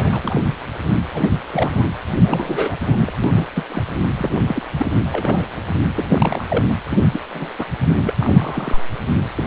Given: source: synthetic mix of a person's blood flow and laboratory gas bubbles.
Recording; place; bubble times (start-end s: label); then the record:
Doppler ultrasound of blood flow; precordium
0.00-0.18 s: bubbles
0.23-0.41 s: bubbles
1.14-1.33 s: bubbles
1.51-1.87 s: bubbles
2.23-3.12 s: bubbles
3.23-3.47 s: bubbles
3.55-3.63 s: bubbles
3.69-3.83 s: bubbles
4.18-4.36 s: bubbles
4.47-4.62 s: bubbles
4.77-4.86 s: bubbles
5.12-5.47 s: bubbles
5.96-6.64 s: bubbles
6.69-6.73 s: bubbles
6.89-7.08 s: bubbles
7.11-7.20 s: bubbles
7.33-7.51 s: bubbles
7.58-7.66 s: bubbles
7.98-8.15 s: bubbles
8.20-8.83 s: bubbles
9.37-9.47 s: bubbles
From the record:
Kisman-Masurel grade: 232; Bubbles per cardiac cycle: several, 3 to 8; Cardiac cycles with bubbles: 50 to 99%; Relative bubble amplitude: moderate (0.250 to 0.450); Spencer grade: 3 (all of the cardiac periods contain showers or single bubble signals, but not dominating or overriding the cardiac motion signals); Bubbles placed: anywhere in the cardiac cycle